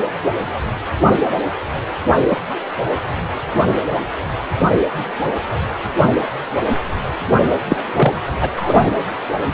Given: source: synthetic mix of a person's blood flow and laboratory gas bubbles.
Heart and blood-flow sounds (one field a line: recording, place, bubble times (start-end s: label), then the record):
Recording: Doppler ultrasound of blood flow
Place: precordium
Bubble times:
2.30-2.41 s: bubbles
7.69-7.76 s: bubbles
7.81-8.15 s: bubbles
8.41-8.50 s: bubbles
8.56-8.88 s: bubbles
From the record:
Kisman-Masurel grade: 123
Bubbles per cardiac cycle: 1 to 2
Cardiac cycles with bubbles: 10 to 50%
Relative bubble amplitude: loud (0.450 to 0.775)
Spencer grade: 2 (many but less than half of the cardiac periods contain bubble signals, singularly or in groups)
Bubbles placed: anywhere in the cardiac cycle